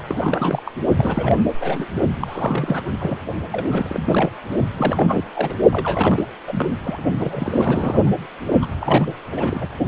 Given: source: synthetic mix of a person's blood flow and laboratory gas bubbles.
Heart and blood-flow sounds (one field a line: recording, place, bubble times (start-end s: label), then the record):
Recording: Doppler ultrasound of blood flow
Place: precordium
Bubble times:
0.08-0.62 s: bubbles
0.65-0.71 s: bubbles
0.97-1.40 s: bubbles
1.60-1.88 s: bubbles
2.21-2.82 s: bubbles
2.90-3.23 s: bubbles
3.52-4.30 s: bubbles
4.78-5.24 s: bubbles
5.34-5.56 s: bubbles
5.71-6.25 s: bubbles
6.47-6.70 s: bubbles
6.83-7.03 s: bubbles
7.20-8.11 s: bubbles
8.62-8.65 s: bubbles
8.80-9.05 s: bubbles
9.31-9.67 s: bubbles
From the record:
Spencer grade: 3 (all of the cardiac periods contain showers or single bubble signals, but not dominating or overriding the cardiac motion signals)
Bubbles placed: only in the low amplitude regions of the cardiac cycle